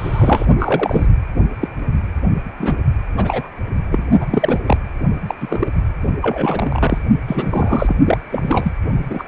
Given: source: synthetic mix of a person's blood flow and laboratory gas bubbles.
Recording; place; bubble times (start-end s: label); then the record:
Doppler ultrasound of blood flow; precordium
0.00-0.46 s: bubbles
0.59-1.06 s: bubbles
1.61-1.68 s: bubbles
2.58-2.75 s: bubbles
3.17-3.48 s: bubbles
3.91-4.07 s: bubbles
4.21-4.26 s: bubbles
4.30-4.59 s: bubbles
4.66-4.77 s: bubbles
5.27-5.34 s: bubbles
5.40-5.68 s: bubbles
6.21-6.98 s: bubbles
7.28-7.96 s: bubbles
8.04-8.18 s: bubbles
8.31-8.72 s: bubbles
9.09-9.24 s: bubbles
From the record:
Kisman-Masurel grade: 242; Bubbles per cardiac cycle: several, 3 to 8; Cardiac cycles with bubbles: 100%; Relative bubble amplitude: moderate (0.250 to 0.450); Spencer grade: 3 (all of the cardiac periods contain showers or single bubble signals, but not dominating or overriding the cardiac motion signals); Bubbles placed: only in the low amplitude regions of the cardiac cycle